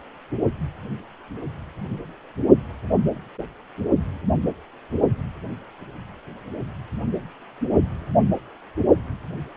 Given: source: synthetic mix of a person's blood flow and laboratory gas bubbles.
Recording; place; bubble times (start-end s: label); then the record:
Doppler ultrasound of blood flow; precordium
no bubbles
From the record:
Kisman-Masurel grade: 000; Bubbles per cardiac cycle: 0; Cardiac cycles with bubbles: 0%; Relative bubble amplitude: no bubbles discernible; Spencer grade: 0 (complete lack of bubble signals)